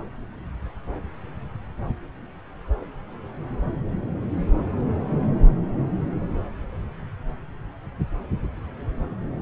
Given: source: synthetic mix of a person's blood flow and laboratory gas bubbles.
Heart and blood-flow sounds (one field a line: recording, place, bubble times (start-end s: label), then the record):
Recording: Doppler ultrasound of blood flow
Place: subclavian vein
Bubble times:
no bubbles
From the record:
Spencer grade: 0 (complete lack of bubble signals)